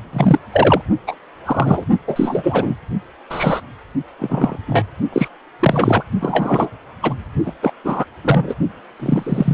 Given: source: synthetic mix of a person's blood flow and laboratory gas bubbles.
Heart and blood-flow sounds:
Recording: Doppler ultrasound of blood flow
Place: precordium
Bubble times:
0.13-0.39 s: bubbles
0.52-0.82 s: bubbles
1.07-1.15 s: bubbles
1.45-1.84 s: bubbles
2.07-2.75 s: bubbles
3.29-3.60 s: bubbles
4.19-4.57 s: bubbles
4.67-4.83 s: bubbles
5.12-5.29 s: bubbles
5.59-6.03 s: bubbles
6.20-6.70 s: bubbles
7.02-7.14 s: bubbles
7.46-7.52 s: bubbles
7.62-7.72 s: bubbles
7.84-8.05 s: bubbles
8.24-8.55 s: bubbles
9.00-9.54 s: bubbles
From the record:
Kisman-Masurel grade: 243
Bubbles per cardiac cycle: several, 3 to 8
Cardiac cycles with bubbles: 100%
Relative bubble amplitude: loud (0.450 to 0.775)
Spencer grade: 3 (all of the cardiac periods contain showers or single bubble signals, but not dominating or overriding the cardiac motion signals)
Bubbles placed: only in the low amplitude regions of the cardiac cycle

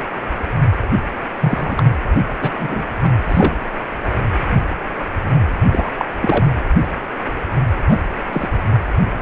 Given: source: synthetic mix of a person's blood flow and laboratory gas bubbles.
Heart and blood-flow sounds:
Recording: Doppler ultrasound of blood flow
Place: precordium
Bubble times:
1.41-1.83 s: bubbles
2.41-2.51 s: bubbles
2.57-2.83 s: bubbles
3.02-3.10 s: bubbles
3.28-3.56 s: bubbles
5.70-5.91 s: bubbles
5.98-6.05 s: bubbles
6.21-6.47 s: bubbles
7.88-7.99 s: bubbles
8.31-8.49 s: bubbles
From the record:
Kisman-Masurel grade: 233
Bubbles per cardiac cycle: several, 3 to 8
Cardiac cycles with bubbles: 50 to 99%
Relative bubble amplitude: loud (0.450 to 0.775)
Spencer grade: 3 (all of the cardiac periods contain showers or single bubble signals, but not dominating or overriding the cardiac motion signals)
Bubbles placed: anywhere in the cardiac cycle

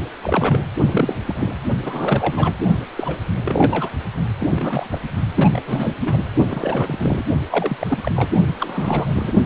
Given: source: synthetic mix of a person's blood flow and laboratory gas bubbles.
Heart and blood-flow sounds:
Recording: Doppler ultrasound of blood flow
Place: precordium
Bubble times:
0.22-0.65 s: bubbles
0.77-1.16 s: bubbles
1.26-1.58 s: bubbles
1.82-2.52 s: bubbles
2.96-3.17 s: bubbles
3.44-3.90 s: bubbles
4.39-4.99 s: bubbles
5.37-5.62 s: bubbles
5.65-5.96 s: bubbles
6.00-6.24 s: bubbles
6.48-7.25 s: bubbles
7.50-7.77 s: bubbles
7.79-7.98 s: bubbles
8.01-8.12 s: bubbles
8.16-8.30 s: bubbles
8.60-9.32 s: bubbles
From the record:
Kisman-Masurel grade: 342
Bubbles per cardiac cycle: rolling drumbeat, 9 or more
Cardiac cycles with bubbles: 100%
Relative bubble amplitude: moderate (0.250 to 0.450)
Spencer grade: 3 (all of the cardiac periods contain showers or single bubble signals, but not dominating or overriding the cardiac motion signals)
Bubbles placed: only in the low amplitude regions of the cardiac cycle

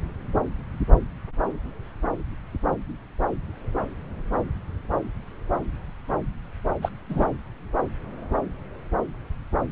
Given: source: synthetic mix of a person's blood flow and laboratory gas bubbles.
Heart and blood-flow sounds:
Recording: Doppler ultrasound of blood flow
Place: subclavian vein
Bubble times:
6.82-6.90 s: bubbles
7.10-7.26 s: bubbles
From the record:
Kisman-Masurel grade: 113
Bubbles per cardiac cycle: 1 to 2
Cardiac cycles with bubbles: 1 to 10%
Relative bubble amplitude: loud (0.450 to 0.775)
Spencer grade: 1 (occasional bubble signal discernible with the cardiac motion signal, with majority of cardiac periods free of bubbles)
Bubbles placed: anywhere in the cardiac cycle

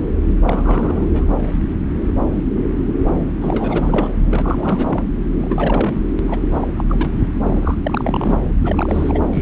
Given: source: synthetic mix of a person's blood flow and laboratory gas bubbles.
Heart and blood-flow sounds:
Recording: Doppler ultrasound of blood flow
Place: subclavian vein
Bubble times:
0.46-1.31 s: bubbles
3.41-4.08 s: bubbles
4.30-5.04 s: bubbles
5.40-5.94 s: bubbles
6.28-6.40 s: bubbles
6.52-6.67 s: bubbles
6.78-6.84 s: bubbles
6.88-7.10 s: bubbles
7.44-7.75 s: bubbles
7.83-8.42 s: bubbles
8.64-9.19 s: bubbles
9.32-9.42 s: bubbles
From the record:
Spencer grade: 3 (all of the cardiac periods contain showers or single bubble signals, but not dominating or overriding the cardiac motion signals)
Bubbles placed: anywhere in the cardiac cycle

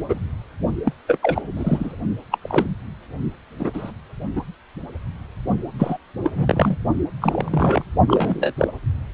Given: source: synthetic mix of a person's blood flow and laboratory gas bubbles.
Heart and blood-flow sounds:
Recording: Doppler ultrasound of blood flow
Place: precordium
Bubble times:
0.09-0.18 s: bubbles
0.85-0.93 s: bubbles
1.07-1.18 s: bubbles
1.23-1.42 s: bubbles
1.56-1.96 s: bubbles
2.31-2.39 s: bubbles
2.42-2.67 s: bubbles
3.59-3.92 s: bubbles
4.36-4.44 s: bubbles
5.79-5.97 s: bubbles
6.23-6.30 s: bubbles
6.35-6.77 s: bubbles
7.21-7.83 s: bubbles
8.07-8.51 s: bubbles
8.57-8.68 s: bubbles
From the record:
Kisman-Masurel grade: 242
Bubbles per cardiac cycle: several, 3 to 8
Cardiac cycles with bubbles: 100%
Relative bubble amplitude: moderate (0.250 to 0.450)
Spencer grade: 3 (all of the cardiac periods contain showers or single bubble signals, but not dominating or overriding the cardiac motion signals)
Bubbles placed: only in the low amplitude regions of the cardiac cycle

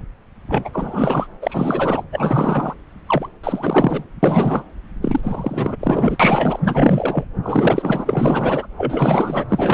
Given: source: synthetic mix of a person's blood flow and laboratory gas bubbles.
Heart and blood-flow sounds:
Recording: Doppler ultrasound of blood flow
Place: subclavian vein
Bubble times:
0.00-0.03 s: bubbles
0.47-0.70 s: bubbles
0.72-1.27 s: bubbles
1.41-2.04 s: bubbles
2.12-2.75 s: bubbles
3.07-3.29 s: bubbles
3.43-4.04 s: bubbles
4.22-4.63 s: bubbles
5.01-5.21 s: bubbles
5.23-5.76 s: bubbles
5.79-6.17 s: bubbles
6.19-6.59 s: bubbles
6.64-7.25 s: bubbles
7.42-8.67 s: bubbles
8.78-9.45 s: bubbles
9.48-9.73 s: bubbles
From the record:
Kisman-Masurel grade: 444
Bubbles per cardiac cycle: continuous sound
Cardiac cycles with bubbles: 100%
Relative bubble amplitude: maximal (0.775 to 0.999)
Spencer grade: 4 (maximum detectable bubble signal sounding continuously throughout systole and diastole of every cardiac period, and overriding the amplitude of the normal cardiac signals)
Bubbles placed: anywhere in the cardiac cycle

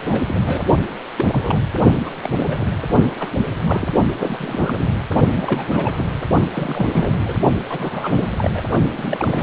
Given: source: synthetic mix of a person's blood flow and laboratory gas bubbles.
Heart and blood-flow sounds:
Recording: Doppler ultrasound of blood flow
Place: precordium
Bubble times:
0.03-0.74 s: bubbles
1.18-1.58 s: bubbles
2.05-2.12 s: bubbles
2.22-2.66 s: bubbles
2.88-3.06 s: bubbles
3.20-3.29 s: bubbles
3.66-3.89 s: bubbles
4.19-4.96 s: bubbles
5.35-5.92 s: bubbles
5.97-6.06 s: bubbles
6.52-7.37 s: bubbles
7.68-8.28 s: bubbles
8.38-8.50 s: bubbles
8.53-8.62 s: bubbles
8.91-9.43 s: bubbles
From the record:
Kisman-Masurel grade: 332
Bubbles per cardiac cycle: rolling drumbeat, 9 or more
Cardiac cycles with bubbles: 50 to 99%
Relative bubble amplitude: moderate (0.250 to 0.450)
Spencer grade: 3 (all of the cardiac periods contain showers or single bubble signals, but not dominating or overriding the cardiac motion signals)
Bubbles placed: only in the low amplitude regions of the cardiac cycle

